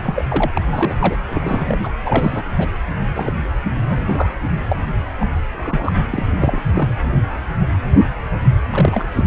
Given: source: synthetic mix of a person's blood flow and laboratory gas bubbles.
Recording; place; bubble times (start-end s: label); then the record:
Doppler ultrasound of blood flow; precordium
0.00-0.24 s: bubbles
0.28-0.61 s: bubbles
0.73-0.96 s: bubbles
0.99-1.16 s: bubbles
1.30-1.90 s: bubbles
2.04-2.44 s: bubbles
2.58-2.68 s: bubbles
3.15-3.32 s: bubbles
3.82-4.31 s: bubbles
4.69-4.81 s: bubbles
5.20-5.26 s: bubbles
5.56-5.93 s: bubbles
6.10-6.27 s: bubbles
6.30-6.62 s: bubbles
6.73-6.88 s: bubbles
8.71-9.08 s: bubbles
9.15-9.27 s: bubbles
From the record:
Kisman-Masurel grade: 232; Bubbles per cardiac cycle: several, 3 to 8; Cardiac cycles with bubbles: 50 to 99%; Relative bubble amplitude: moderate (0.250 to 0.450); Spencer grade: 3 (all of the cardiac periods contain showers or single bubble signals, but not dominating or overriding the cardiac motion signals); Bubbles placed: anywhere in the cardiac cycle